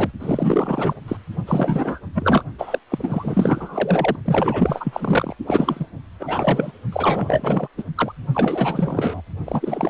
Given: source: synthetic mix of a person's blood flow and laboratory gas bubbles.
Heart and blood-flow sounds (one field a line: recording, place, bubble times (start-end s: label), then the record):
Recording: Doppler ultrasound of blood flow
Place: precordium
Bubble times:
0.00-0.10 s: bubbles
0.19-0.94 s: bubbles
1.07-1.17 s: bubbles
1.47-2.01 s: bubbles
2.13-2.43 s: bubbles
2.58-2.79 s: bubbles
2.90-4.16 s: bubbles
4.25-5.35 s: bubbles
5.47-5.86 s: bubbles
6.20-6.72 s: bubbles
6.92-7.68 s: bubbles
7.78-7.84 s: bubbles
7.95-8.12 s: bubbles
8.34-9.21 s: bubbles
9.46-9.90 s: bubbles
From the record:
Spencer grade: 4 (maximum detectable bubble signal sounding continuously throughout systole and diastole of every cardiac period, and overriding the amplitude of the normal cardiac signals)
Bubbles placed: only in the low amplitude regions of the cardiac cycle